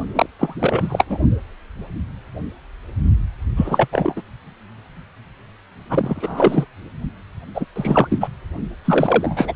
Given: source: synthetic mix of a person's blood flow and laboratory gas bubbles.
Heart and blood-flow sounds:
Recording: Doppler ultrasound of blood flow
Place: precordium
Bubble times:
0.15-0.26 s: bubbles
0.39-0.54 s: bubbles
0.59-1.05 s: bubbles
1.09-1.19 s: bubbles
3.56-3.88 s: bubbles
3.92-4.21 s: bubbles
5.89-6.65 s: bubbles
7.54-7.65 s: bubbles
7.75-8.28 s: bubbles
8.85-9.54 s: bubbles
From the record:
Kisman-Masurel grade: 333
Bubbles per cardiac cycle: rolling drumbeat, 9 or more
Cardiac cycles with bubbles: 50 to 99%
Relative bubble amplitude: loud (0.450 to 0.775)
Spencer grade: 3 (all of the cardiac periods contain showers or single bubble signals, but not dominating or overriding the cardiac motion signals)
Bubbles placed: only in the low amplitude regions of the cardiac cycle

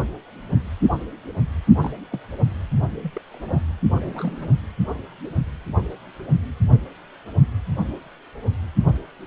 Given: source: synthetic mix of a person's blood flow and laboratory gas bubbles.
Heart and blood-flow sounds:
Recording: Doppler ultrasound of blood flow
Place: precordium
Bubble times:
1.81-1.93 s: bubbles
2.11-2.20 s: bubbles
3.02-3.21 s: bubbles
3.31-3.60 s: bubbles
3.92-4.49 s: bubbles
From the record:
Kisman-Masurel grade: 221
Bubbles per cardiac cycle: several, 3 to 8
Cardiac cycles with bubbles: 10 to 50%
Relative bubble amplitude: barely perceptible (0.100 to 0.250)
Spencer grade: 2 (many but less than half of the cardiac periods contain bubble signals, singularly or in groups)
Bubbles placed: only in the low amplitude regions of the cardiac cycle

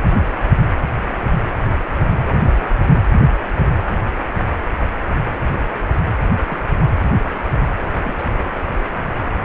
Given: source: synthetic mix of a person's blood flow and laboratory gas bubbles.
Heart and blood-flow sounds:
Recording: Doppler ultrasound of blood flow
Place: precordium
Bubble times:
2.39-2.53 s: bubbles
5.55-5.67 s: bubbles
6.46-6.58 s: bubbles
8.05-8.13 s: bubbles
8.17-8.24 s: bubbles
9.25-9.39 s: bubbles
From the record:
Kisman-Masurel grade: 121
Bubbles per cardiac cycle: 1 to 2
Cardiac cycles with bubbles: 10 to 50%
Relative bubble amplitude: barely perceptible (0.100 to 0.250)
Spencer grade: 2 (many but less than half of the cardiac periods contain bubble signals, singularly or in groups)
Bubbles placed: anywhere in the cardiac cycle

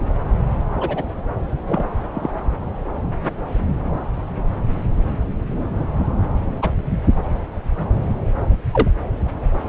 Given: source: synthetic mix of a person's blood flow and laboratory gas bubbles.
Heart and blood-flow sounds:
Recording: Doppler ultrasound of blood flow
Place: subclavian vein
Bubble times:
0.80-1.03 s: bubbles
1.67-1.93 s: bubbles
2.15-2.29 s: bubbles
6.62-6.71 s: bubbles
8.72-8.90 s: bubbles
From the record:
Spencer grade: 2 (many but less than half of the cardiac periods contain bubble signals, singularly or in groups)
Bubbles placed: anywhere in the cardiac cycle

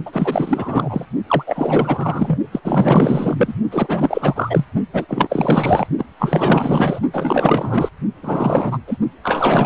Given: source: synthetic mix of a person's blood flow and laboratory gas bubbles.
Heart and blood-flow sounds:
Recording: Doppler ultrasound of blood flow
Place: precordium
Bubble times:
0.05-1.05 s: bubbles
1.27-1.44 s: bubbles
1.46-2.37 s: bubbles
2.52-2.60 s: bubbles
2.63-3.54 s: bubbles
3.71-4.65 s: bubbles
4.93-5.05 s: bubbles
5.08-5.87 s: bubbles
5.97-6.05 s: bubbles
6.19-6.99 s: bubbles
7.13-7.89 s: bubbles
8.22-8.79 s: bubbles
8.87-8.97 s: bubbles
9.23-9.66 s: bubbles
From the record:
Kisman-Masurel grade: 444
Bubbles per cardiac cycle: continuous sound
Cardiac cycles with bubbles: 100%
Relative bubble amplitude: maximal (0.775 to 0.999)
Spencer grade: 4 (maximum detectable bubble signal sounding continuously throughout systole and diastole of every cardiac period, and overriding the amplitude of the normal cardiac signals)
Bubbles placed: only in the low amplitude regions of the cardiac cycle

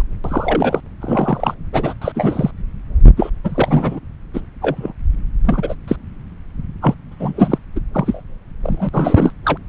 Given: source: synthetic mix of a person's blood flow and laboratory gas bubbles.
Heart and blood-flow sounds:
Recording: Doppler ultrasound of blood flow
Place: subclavian vein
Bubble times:
0.00-0.02 s: bubbles
0.24-0.80 s: bubbles
1.00-1.54 s: bubbles
1.72-1.93 s: bubbles
2.01-2.12 s: bubbles
2.14-2.51 s: bubbles
3.17-3.29 s: bubbles
3.44-4.00 s: bubbles
4.33-4.41 s: bubbles
4.61-4.93 s: bubbles
5.45-5.75 s: bubbles
5.88-5.96 s: bubbles
6.81-6.94 s: bubbles
7.11-7.58 s: bubbles
7.75-7.81 s: bubbles
7.94-8.21 s: bubbles
8.63-8.89 s: bubbles
8.93-9.33 s: bubbles
9.45-9.58 s: bubbles
From the record:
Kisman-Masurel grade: 243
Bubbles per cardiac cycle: several, 3 to 8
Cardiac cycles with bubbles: 100%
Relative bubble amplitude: loud (0.450 to 0.775)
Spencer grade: 3 (all of the cardiac periods contain showers or single bubble signals, but not dominating or overriding the cardiac motion signals)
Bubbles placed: anywhere in the cardiac cycle

